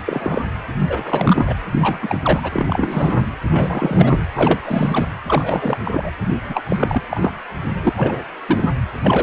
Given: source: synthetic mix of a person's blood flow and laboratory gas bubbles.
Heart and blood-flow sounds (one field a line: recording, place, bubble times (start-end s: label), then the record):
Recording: Doppler ultrasound of blood flow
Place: precordium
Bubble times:
0.05-0.42 s: bubbles
0.85-1.58 s: bubbles
1.72-2.19 s: bubbles
2.22-2.49 s: bubbles
2.52-3.30 s: bubbles
3.50-4.26 s: bubbles
4.35-4.60 s: bubbles
4.64-5.06 s: bubbles
5.27-5.77 s: bubbles
5.84-6.10 s: bubbles
6.43-6.61 s: bubbles
6.68-7.31 s: bubbles
7.75-8.25 s: bubbles
8.47-8.71 s: bubbles
9.04-9.23 s: bubbles
From the record:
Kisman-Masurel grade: 343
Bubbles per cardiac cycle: rolling drumbeat, 9 or more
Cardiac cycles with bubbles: 100%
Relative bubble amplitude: loud (0.450 to 0.775)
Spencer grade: 3 (all of the cardiac periods contain showers or single bubble signals, but not dominating or overriding the cardiac motion signals)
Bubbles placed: anywhere in the cardiac cycle